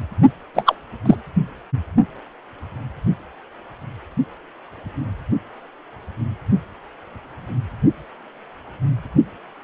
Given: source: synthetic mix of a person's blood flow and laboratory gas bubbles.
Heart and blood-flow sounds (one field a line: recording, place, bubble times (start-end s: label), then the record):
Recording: Doppler ultrasound of blood flow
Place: precordium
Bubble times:
0.54-0.75 s: bubbles
1.05-1.16 s: bubbles
From the record:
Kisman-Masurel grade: 213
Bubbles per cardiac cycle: several, 3 to 8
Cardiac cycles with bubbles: 1 to 10%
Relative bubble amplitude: loud (0.450 to 0.775)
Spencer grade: 1 (occasional bubble signal discernible with the cardiac motion signal, with majority of cardiac periods free of bubbles)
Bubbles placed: only in the low amplitude regions of the cardiac cycle